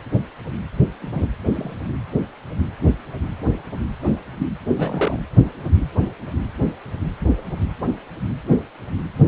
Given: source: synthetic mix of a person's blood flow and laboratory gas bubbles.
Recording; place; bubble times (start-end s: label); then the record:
Doppler ultrasound of blood flow; precordium
1.01-1.28 s: bubbles
1.49-1.77 s: bubbles
4.39-4.47 s: bubbles
4.77-5.20 s: bubbles
From the record:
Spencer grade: 2 (many but less than half of the cardiac periods contain bubble signals, singularly or in groups); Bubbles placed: anywhere in the cardiac cycle